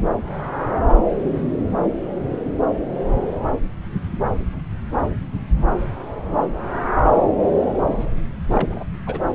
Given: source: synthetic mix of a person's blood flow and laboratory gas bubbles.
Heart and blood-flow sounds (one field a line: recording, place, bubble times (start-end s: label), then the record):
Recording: Doppler ultrasound of blood flow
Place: subclavian vein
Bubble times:
8.48-8.84 s: bubbles
9.07-9.19 s: bubbles
From the record:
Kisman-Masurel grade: 211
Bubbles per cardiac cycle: several, 3 to 8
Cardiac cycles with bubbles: 1 to 10%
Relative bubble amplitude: barely perceptible (0.100 to 0.250)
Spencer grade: 1 (occasional bubble signal discernible with the cardiac motion signal, with majority of cardiac periods free of bubbles)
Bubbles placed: anywhere in the cardiac cycle